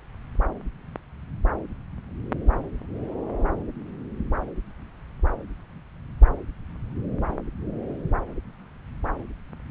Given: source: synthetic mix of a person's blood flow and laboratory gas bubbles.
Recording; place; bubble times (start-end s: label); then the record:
Doppler ultrasound of blood flow; subclavian vein
no bubbles
From the record:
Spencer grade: 0 (complete lack of bubble signals)